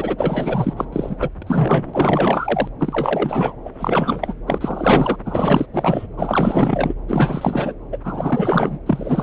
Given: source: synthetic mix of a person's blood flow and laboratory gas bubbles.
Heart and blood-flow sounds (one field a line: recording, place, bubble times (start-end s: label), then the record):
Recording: Doppler ultrasound of blood flow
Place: subclavian vein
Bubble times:
0.00-0.85 s: bubbles
0.92-1.17 s: bubbles
1.19-1.29 s: bubbles
1.42-2.69 s: bubbles
2.79-3.56 s: bubbles
3.65-3.70 s: bubbles
3.77-4.35 s: bubbles
4.46-5.16 s: bubbles
5.25-5.66 s: bubbles
5.73-6.06 s: bubbles
6.17-6.94 s: bubbles
7.08-7.74 s: bubbles
7.92-7.99 s: bubbles
8.04-8.78 s: bubbles
8.86-9.23 s: bubbles
From the record:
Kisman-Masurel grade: 444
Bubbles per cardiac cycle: continuous sound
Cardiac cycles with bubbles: 100%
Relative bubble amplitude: maximal (0.775 to 0.999)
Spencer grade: 4 (maximum detectable bubble signal sounding continuously throughout systole and diastole of every cardiac period, and overriding the amplitude of the normal cardiac signals)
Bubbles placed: anywhere in the cardiac cycle